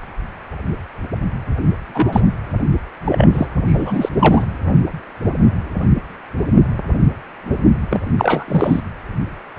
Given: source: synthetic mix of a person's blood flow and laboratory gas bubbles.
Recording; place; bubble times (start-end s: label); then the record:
Doppler ultrasound of blood flow; precordium
1.94-2.23 s: bubbles
3.05-3.29 s: bubbles
3.32-3.46 s: bubbles
3.66-4.09 s: bubbles
4.14-4.46 s: bubbles
7.90-8.05 s: bubbles
8.17-8.44 s: bubbles
8.48-8.82 s: bubbles
From the record:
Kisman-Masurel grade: 223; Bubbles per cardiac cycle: several, 3 to 8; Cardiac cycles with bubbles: 10 to 50%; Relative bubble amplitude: loud (0.450 to 0.775); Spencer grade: 2 (many but less than half of the cardiac periods contain bubble signals, singularly or in groups); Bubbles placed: anywhere in the cardiac cycle